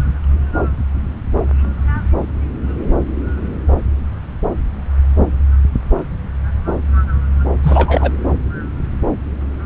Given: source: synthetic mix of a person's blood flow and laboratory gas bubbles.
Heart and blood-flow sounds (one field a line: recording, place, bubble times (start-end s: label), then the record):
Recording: Doppler ultrasound of blood flow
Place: subclavian vein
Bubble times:
7.62-8.12 s: bubbles
From the record:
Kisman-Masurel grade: 213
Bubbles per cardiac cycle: several, 3 to 8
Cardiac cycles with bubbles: 1 to 10%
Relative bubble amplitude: loud (0.450 to 0.775)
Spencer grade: 1 (occasional bubble signal discernible with the cardiac motion signal, with majority of cardiac periods free of bubbles)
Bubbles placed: anywhere in the cardiac cycle